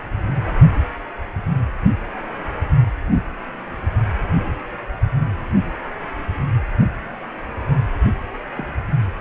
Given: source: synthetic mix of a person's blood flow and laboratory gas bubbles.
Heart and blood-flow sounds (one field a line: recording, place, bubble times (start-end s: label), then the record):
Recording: Doppler ultrasound of blood flow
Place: precordium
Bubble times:
8.54-8.73 s: bubbles
From the record:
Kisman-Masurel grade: 111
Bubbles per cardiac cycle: 1 to 2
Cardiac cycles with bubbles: 1 to 10%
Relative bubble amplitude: barely perceptible (0.100 to 0.250)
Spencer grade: 1 (occasional bubble signal discernible with the cardiac motion signal, with majority of cardiac periods free of bubbles)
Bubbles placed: anywhere in the cardiac cycle